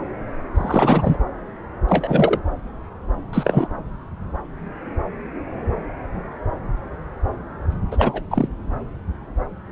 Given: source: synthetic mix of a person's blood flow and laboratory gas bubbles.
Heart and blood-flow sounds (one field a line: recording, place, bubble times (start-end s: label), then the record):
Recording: Doppler ultrasound of blood flow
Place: subclavian vein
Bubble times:
0.55-1.17 s: bubbles
1.88-2.40 s: bubbles
3.33-3.67 s: bubbles
7.91-8.22 s: bubbles
8.31-8.48 s: bubbles
From the record:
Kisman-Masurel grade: 222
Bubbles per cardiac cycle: several, 3 to 8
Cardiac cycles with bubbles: 10 to 50%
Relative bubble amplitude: moderate (0.250 to 0.450)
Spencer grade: 2 (many but less than half of the cardiac periods contain bubble signals, singularly or in groups)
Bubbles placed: anywhere in the cardiac cycle